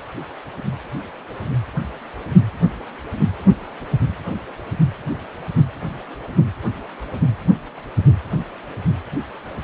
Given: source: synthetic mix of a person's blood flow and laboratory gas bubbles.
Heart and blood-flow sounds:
Doppler ultrasound of blood flow; precordium
no bubbles
From the record:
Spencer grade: 0 (complete lack of bubble signals)

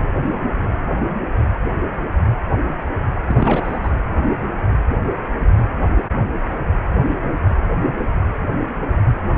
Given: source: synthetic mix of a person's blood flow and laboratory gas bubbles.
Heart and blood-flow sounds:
Doppler ultrasound of blood flow; precordium
3.25-3.92 s: bubbles
From the record:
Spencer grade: 1 (occasional bubble signal discernible with the cardiac motion signal, with majority of cardiac periods free of bubbles); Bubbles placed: anywhere in the cardiac cycle

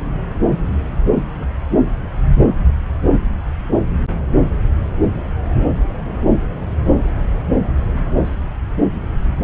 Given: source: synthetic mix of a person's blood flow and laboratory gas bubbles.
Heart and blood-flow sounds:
Doppler ultrasound of blood flow; subclavian vein
1.06-1.11 s: bubbles
1.40-1.47 s: bubbles
6.04-6.25 s: bubbles
8.25-8.36 s: bubbles
9.12-9.36 s: bubbles
From the record:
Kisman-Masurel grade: 121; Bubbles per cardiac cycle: 1 to 2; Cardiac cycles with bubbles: 10 to 50%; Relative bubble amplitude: barely perceptible (0.100 to 0.250); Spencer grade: 2 (many but less than half of the cardiac periods contain bubble signals, singularly or in groups); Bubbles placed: anywhere in the cardiac cycle

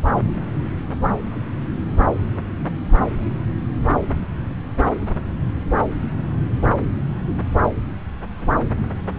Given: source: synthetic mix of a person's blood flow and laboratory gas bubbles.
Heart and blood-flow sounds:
Doppler ultrasound of blood flow; subclavian vein
no bubbles
From the record:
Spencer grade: 0 (complete lack of bubble signals)

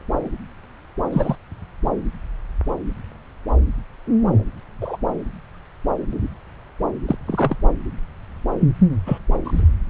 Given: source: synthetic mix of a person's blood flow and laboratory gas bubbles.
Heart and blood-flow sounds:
Doppler ultrasound of blood flow; subclavian vein
1.12-1.35 s: bubbles
4.81-4.97 s: bubbles
7.08-7.16 s: bubbles
7.26-7.57 s: bubbles
9.06-9.18 s: bubbles
9.44-9.62 s: bubbles
From the record:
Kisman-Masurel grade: 123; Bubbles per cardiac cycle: 1 to 2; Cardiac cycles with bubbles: 10 to 50%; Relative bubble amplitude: loud (0.450 to 0.775); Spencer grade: 2 (many but less than half of the cardiac periods contain bubble signals, singularly or in groups); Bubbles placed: anywhere in the cardiac cycle

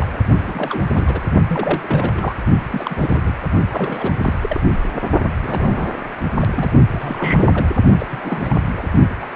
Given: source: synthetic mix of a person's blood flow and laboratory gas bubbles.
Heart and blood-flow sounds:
Doppler ultrasound of blood flow; precordium
0.00-0.17 s: bubbles
0.38-0.84 s: bubbles
0.95-1.20 s: bubbles
1.48-2.35 s: bubbles
2.67-2.95 s: bubbles
2.98-3.21 s: bubbles
3.26-3.33 s: bubbles
3.71-4.13 s: bubbles
4.22-4.34 s: bubbles
4.41-4.62 s: bubbles
5.42-5.91 s: bubbles
6.41-6.46 s: bubbles
6.55-6.69 s: bubbles
6.89-7.68 s: bubbles
7.98-8.58 s: bubbles
8.76-8.88 s: bubbles
9.21-9.27 s: bubbles
From the record:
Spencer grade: 3 (all of the cardiac periods contain showers or single bubble signals, but not dominating or overriding the cardiac motion signals); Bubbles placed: only in the low amplitude regions of the cardiac cycle

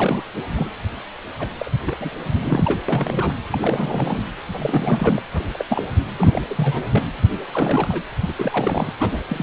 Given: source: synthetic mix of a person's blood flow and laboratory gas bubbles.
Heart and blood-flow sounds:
Doppler ultrasound of blood flow; precordium
0.00-0.22 s: bubbles
0.55-0.68 s: bubbles
1.39-1.52 s: bubbles
1.58-1.71 s: bubbles
1.85-2.10 s: bubbles
2.23-2.79 s: bubbles
2.88-3.33 s: bubbles
3.50-4.24 s: bubbles
4.34-5.21 s: bubbles
5.33-5.43 s: bubbles
5.54-5.65 s: bubbles
5.69-5.87 s: bubbles
6.16-6.41 s: bubbles
6.50-6.85 s: bubbles
6.92-7.04 s: bubbles
7.54-8.02 s: bubbles
8.21-8.33 s: bubbles
8.38-8.91 s: bubbles
8.98-9.43 s: bubbles
From the record:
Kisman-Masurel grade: 342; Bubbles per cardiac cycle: rolling drumbeat, 9 or more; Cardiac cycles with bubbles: 100%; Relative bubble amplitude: moderate (0.250 to 0.450); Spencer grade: 3 (all of the cardiac periods contain showers or single bubble signals, but not dominating or overriding the cardiac motion signals); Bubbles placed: anywhere in the cardiac cycle

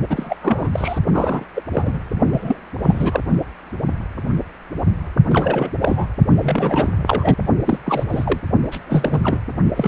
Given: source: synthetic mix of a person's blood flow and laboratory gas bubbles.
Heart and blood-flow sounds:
Doppler ultrasound of blood flow; precordium
0.09-0.36 s: bubbles
0.41-0.69 s: bubbles
0.73-0.99 s: bubbles
1.12-1.45 s: bubbles
1.55-1.62 s: bubbles
1.72-1.99 s: bubbles
2.32-2.58 s: bubbles
2.84-3.20 s: bubbles
5.29-5.71 s: bubbles
5.82-6.08 s: bubbles
6.41-6.92 s: bubbles
7.07-7.36 s: bubbles
7.65-7.79 s: bubbles
7.86-8.04 s: bubbles
8.09-8.40 s: bubbles
8.71-8.79 s: bubbles
8.87-9.38 s: bubbles
9.76-9.88 s: bubbles
From the record:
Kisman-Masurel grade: 332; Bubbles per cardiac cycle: rolling drumbeat, 9 or more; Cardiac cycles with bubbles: 50 to 99%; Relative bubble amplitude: moderate (0.250 to 0.450); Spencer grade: 3 (all of the cardiac periods contain showers or single bubble signals, but not dominating or overriding the cardiac motion signals); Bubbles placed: only in the low amplitude regions of the cardiac cycle

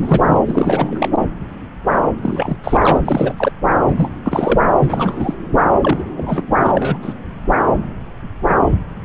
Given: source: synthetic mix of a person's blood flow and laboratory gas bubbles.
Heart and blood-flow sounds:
Doppler ultrasound of blood flow; subclavian vein
0.01-0.38 s: bubbles
0.46-1.08 s: bubbles
2.22-2.57 s: bubbles
2.64-3.01 s: bubbles
3.04-3.33 s: bubbles
3.37-3.52 s: bubbles
3.86-4.09 s: bubbles
4.24-4.59 s: bubbles
4.79-5.34 s: bubbles
5.82-6.03 s: bubbles
6.17-6.43 s: bubbles
6.64-6.72 s: bubbles
6.74-6.97 s: bubbles
7.02-7.13 s: bubbles
From the record:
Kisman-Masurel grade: 332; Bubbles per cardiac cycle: rolling drumbeat, 9 or more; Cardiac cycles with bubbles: 50 to 99%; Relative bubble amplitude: moderate (0.250 to 0.450); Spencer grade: 3 (all of the cardiac periods contain showers or single bubble signals, but not dominating or overriding the cardiac motion signals); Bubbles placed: anywhere in the cardiac cycle

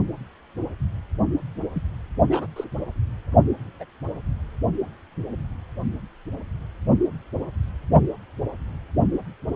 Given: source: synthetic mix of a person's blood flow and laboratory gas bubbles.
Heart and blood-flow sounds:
Doppler ultrasound of blood flow; precordium
1.74-1.82 s: bubbles
2.29-2.47 s: bubbles
2.56-2.65 s: bubbles
3.79-3.85 s: bubbles
From the record:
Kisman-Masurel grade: 121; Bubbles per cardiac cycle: 1 to 2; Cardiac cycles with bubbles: 10 to 50%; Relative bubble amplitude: barely perceptible (0.100 to 0.250); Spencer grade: 2 (many but less than half of the cardiac periods contain bubble signals, singularly or in groups); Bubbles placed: only in the low amplitude regions of the cardiac cycle

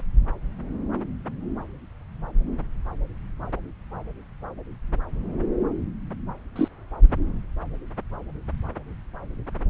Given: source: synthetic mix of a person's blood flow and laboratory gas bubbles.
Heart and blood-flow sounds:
Doppler ultrasound of blood flow; subclavian vein
6.55-6.68 s: bubbles
From the record:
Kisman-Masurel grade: 112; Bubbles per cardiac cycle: 1 to 2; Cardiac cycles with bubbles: 1 to 10%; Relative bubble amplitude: moderate (0.250 to 0.450); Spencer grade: 1 (occasional bubble signal discernible with the cardiac motion signal, with majority of cardiac periods free of bubbles); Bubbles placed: anywhere in the cardiac cycle

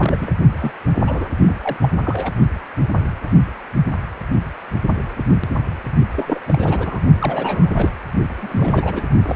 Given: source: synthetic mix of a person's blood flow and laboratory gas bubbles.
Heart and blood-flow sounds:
Doppler ultrasound of blood flow; precordium
0.00-0.31 s: bubbles
0.58-0.72 s: bubbles
1.06-1.29 s: bubbles
1.46-1.57 s: bubbles
1.62-1.76 s: bubbles
1.80-1.88 s: bubbles
2.01-2.32 s: bubbles
6.15-6.41 s: bubbles
6.47-6.99 s: bubbles
7.19-7.93 s: bubbles
8.40-9.03 s: bubbles
9.27-9.36 s: bubbles
From the record:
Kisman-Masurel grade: 332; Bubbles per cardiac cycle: rolling drumbeat, 9 or more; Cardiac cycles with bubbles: 50 to 99%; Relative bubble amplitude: moderate (0.250 to 0.450); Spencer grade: 3 (all of the cardiac periods contain showers or single bubble signals, but not dominating or overriding the cardiac motion signals); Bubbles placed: only in the low amplitude regions of the cardiac cycle

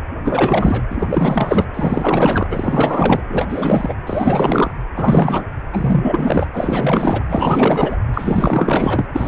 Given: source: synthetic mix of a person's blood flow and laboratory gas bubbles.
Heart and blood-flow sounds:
Doppler ultrasound of blood flow; precordium
0.24-0.83 s: bubbles
0.89-1.65 s: bubbles
1.73-2.48 s: bubbles
2.50-3.21 s: bubbles
3.29-3.94 s: bubbles
4.06-4.73 s: bubbles
4.96-5.44 s: bubbles
5.73-6.48 s: bubbles
6.52-7.24 s: bubbles
7.27-7.97 s: bubbles
8.13-9.06 s: bubbles
9.13-9.28 s: bubbles
From the record:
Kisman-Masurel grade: 444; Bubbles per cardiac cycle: continuous sound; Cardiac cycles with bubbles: 100%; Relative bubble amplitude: maximal (0.775 to 0.999); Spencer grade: 4 (maximum detectable bubble signal sounding continuously throughout systole and diastole of every cardiac period, and overriding the amplitude of the normal cardiac signals); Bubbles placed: anywhere in the cardiac cycle

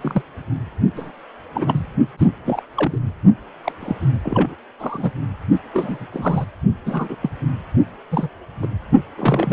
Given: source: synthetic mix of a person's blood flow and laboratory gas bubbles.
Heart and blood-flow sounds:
Doppler ultrasound of blood flow; precordium
0.00-0.22 s: bubbles
0.95-1.11 s: bubbles
1.54-1.85 s: bubbles
2.17-2.28 s: bubbles
2.45-2.61 s: bubbles
2.76-2.98 s: bubbles
3.64-3.72 s: bubbles
3.80-3.95 s: bubbles
4.23-4.54 s: bubbles
4.79-5.12 s: bubbles
5.73-6.07 s: bubbles
6.12-6.46 s: bubbles
6.85-7.17 s: bubbles
7.23-7.30 s: bubbles
8.11-8.29 s: bubbles
8.62-8.67 s: bubbles
9.17-9.53 s: bubbles
From the record:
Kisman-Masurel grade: 242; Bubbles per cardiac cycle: several, 3 to 8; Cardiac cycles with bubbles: 100%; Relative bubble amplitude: moderate (0.250 to 0.450); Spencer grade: 3 (all of the cardiac periods contain showers or single bubble signals, but not dominating or overriding the cardiac motion signals); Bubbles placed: only in the low amplitude regions of the cardiac cycle

